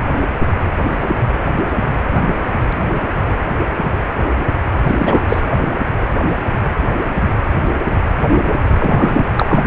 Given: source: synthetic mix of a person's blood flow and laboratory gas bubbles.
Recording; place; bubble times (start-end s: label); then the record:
Doppler ultrasound of blood flow; precordium
4.86-5.40 s: bubbles
8.78-9.24 s: bubbles
9.38-9.62 s: bubbles
From the record:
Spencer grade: 2 (many but less than half of the cardiac periods contain bubble signals, singularly or in groups); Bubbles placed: anywhere in the cardiac cycle